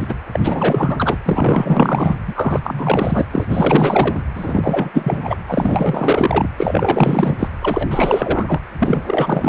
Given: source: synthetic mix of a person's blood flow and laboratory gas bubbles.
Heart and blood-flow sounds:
Doppler ultrasound of blood flow; precordium
0.00-0.14 s: bubbles
0.32-1.18 s: bubbles
1.25-2.19 s: bubbles
2.27-2.59 s: bubbles
2.63-3.25 s: bubbles
3.30-3.46 s: bubbles
3.49-4.24 s: bubbles
4.35-5.38 s: bubbles
5.48-6.50 s: bubbles
6.57-7.49 s: bubbles
7.62-8.61 s: bubbles
8.79-9.03 s: bubbles
9.05-9.49 s: bubbles
From the record:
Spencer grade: 4 (maximum detectable bubble signal sounding continuously throughout systole and diastole of every cardiac period, and overriding the amplitude of the normal cardiac signals); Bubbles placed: anywhere in the cardiac cycle

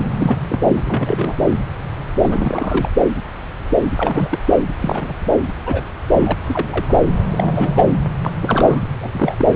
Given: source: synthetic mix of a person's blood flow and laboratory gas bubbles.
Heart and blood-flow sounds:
Doppler ultrasound of blood flow; subclavian vein
0.19-0.36 s: bubbles
0.49-0.62 s: bubbles
0.68-0.82 s: bubbles
0.85-1.34 s: bubbles
2.22-2.89 s: bubbles
3.98-4.39 s: bubbles
4.81-5.14 s: bubbles
5.66-5.84 s: bubbles
6.08-6.36 s: bubbles
6.43-6.99 s: bubbles
7.32-7.92 s: bubbles
8.22-8.31 s: bubbles
8.41-8.82 s: bubbles
9.02-9.35 s: bubbles
9.38-9.52 s: bubbles
From the record:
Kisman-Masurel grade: 232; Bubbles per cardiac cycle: several, 3 to 8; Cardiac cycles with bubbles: 50 to 99%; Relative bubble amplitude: moderate (0.250 to 0.450); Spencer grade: 3 (all of the cardiac periods contain showers or single bubble signals, but not dominating or overriding the cardiac motion signals); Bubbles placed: anywhere in the cardiac cycle

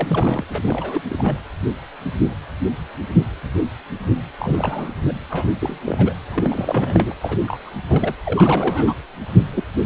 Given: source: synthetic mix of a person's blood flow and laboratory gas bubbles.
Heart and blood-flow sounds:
Doppler ultrasound of blood flow; precordium
0.00-0.44 s: bubbles
0.48-1.02 s: bubbles
1.09-1.40 s: bubbles
4.39-4.89 s: bubbles
5.07-5.12 s: bubbles
5.30-5.53 s: bubbles
5.60-5.79 s: bubbles
5.85-6.13 s: bubbles
6.31-7.14 s: bubbles
7.21-7.38 s: bubbles
7.40-7.71 s: bubbles
7.89-8.15 s: bubbles
8.25-8.93 s: bubbles
9.53-9.63 s: bubbles
9.83-9.86 s: bubbles
From the record:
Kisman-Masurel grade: 332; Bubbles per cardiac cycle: rolling drumbeat, 9 or more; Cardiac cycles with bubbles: 50 to 99%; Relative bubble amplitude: moderate (0.250 to 0.450); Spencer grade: 3 (all of the cardiac periods contain showers or single bubble signals, but not dominating or overriding the cardiac motion signals); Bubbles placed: anywhere in the cardiac cycle

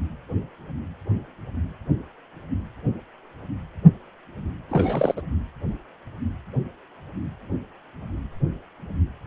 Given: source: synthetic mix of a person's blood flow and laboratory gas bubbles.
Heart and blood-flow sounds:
Doppler ultrasound of blood flow; precordium
4.68-5.21 s: bubbles
From the record:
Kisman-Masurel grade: 212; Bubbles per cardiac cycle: several, 3 to 8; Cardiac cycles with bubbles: 1 to 10%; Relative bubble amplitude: moderate (0.250 to 0.450); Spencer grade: 1 (occasional bubble signal discernible with the cardiac motion signal, with majority of cardiac periods free of bubbles); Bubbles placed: anywhere in the cardiac cycle

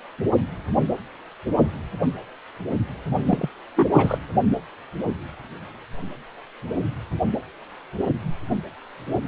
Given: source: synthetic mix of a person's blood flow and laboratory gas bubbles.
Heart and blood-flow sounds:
Doppler ultrasound of blood flow; precordium
3.27-3.50 s: bubbles
3.76-3.88 s: bubbles
3.93-4.18 s: bubbles
From the record:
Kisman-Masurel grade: 222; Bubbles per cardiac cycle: several, 3 to 8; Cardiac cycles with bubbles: 10 to 50%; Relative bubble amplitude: moderate (0.250 to 0.450); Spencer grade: 2 (many but less than half of the cardiac periods contain bubble signals, singularly or in groups); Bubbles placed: only in the low amplitude regions of the cardiac cycle

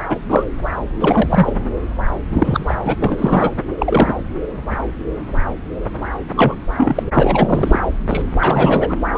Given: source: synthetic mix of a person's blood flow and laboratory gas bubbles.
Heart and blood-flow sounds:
Doppler ultrasound of blood flow; subclavian vein
0.09-0.18 s: bubbles
0.29-0.44 s: bubbles
0.99-1.54 s: bubbles
2.33-2.75 s: bubbles
2.85-2.95 s: bubbles
2.97-3.51 s: bubbles
3.78-4.17 s: bubbles
6.36-6.54 s: bubbles
6.77-7.03 s: bubbles
7.15-7.79 s: bubbles
8.08-8.22 s: bubbles
8.39-8.94 s: bubbles
9.15-9.18 s: bubbles
From the record:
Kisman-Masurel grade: 233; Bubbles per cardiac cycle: several, 3 to 8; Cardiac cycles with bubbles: 50 to 99%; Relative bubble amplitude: loud (0.450 to 0.775); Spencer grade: 3 (all of the cardiac periods contain showers or single bubble signals, but not dominating or overriding the cardiac motion signals); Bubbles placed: anywhere in the cardiac cycle

